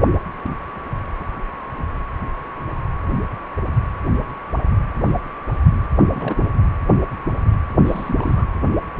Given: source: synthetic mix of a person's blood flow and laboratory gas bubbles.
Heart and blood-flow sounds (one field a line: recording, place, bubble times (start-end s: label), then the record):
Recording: Doppler ultrasound of blood flow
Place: precordium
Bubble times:
6.01-6.47 s: bubbles
7.85-8.46 s: bubbles
From the record:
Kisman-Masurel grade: 221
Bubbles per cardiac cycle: several, 3 to 8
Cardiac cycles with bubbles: 10 to 50%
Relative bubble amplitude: barely perceptible (0.100 to 0.250)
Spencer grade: 2 (many but less than half of the cardiac periods contain bubble signals, singularly or in groups)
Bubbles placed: anywhere in the cardiac cycle